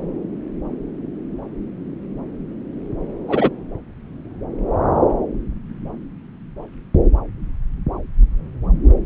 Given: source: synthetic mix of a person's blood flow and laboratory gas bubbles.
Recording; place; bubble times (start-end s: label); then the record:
Doppler ultrasound of blood flow; subclavian vein
3.28-3.50 s: bubbles
From the record:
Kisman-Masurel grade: 113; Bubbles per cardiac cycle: 1 to 2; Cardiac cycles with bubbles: 1 to 10%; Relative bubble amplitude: loud (0.450 to 0.775); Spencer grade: 1 (occasional bubble signal discernible with the cardiac motion signal, with majority of cardiac periods free of bubbles); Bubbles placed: anywhere in the cardiac cycle